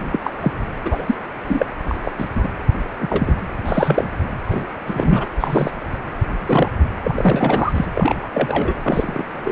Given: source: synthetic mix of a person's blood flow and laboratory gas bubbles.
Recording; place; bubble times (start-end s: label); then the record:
Doppler ultrasound of blood flow; precordium
0.12-0.30 s: bubbles
0.40-0.52 s: bubbles
0.85-1.15 s: bubbles
1.48-1.66 s: bubbles
1.88-2.11 s: bubbles
2.17-2.29 s: bubbles
2.35-2.48 s: bubbles
3.00-3.33 s: bubbles
3.65-4.04 s: bubbles
4.50-4.67 s: bubbles
4.86-5.25 s: bubbles
5.40-5.71 s: bubbles
6.35-6.71 s: bubbles
7.04-7.85 s: bubbles
7.95-8.74 s: bubbles
8.82-9.23 s: bubbles
9.44-9.52 s: bubbles
From the record:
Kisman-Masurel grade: 233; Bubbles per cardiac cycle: several, 3 to 8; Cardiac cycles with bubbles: 50 to 99%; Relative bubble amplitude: loud (0.450 to 0.775); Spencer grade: 3 (all of the cardiac periods contain showers or single bubble signals, but not dominating or overriding the cardiac motion signals); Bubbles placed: anywhere in the cardiac cycle